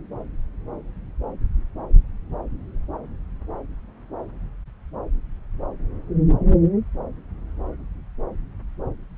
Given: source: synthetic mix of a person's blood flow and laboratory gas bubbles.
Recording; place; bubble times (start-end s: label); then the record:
Doppler ultrasound of blood flow; subclavian vein
no bubbles
From the record:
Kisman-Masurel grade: 000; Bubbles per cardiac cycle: 0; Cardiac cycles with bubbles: 0%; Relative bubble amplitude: no bubbles discernible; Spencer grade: 0 (complete lack of bubble signals)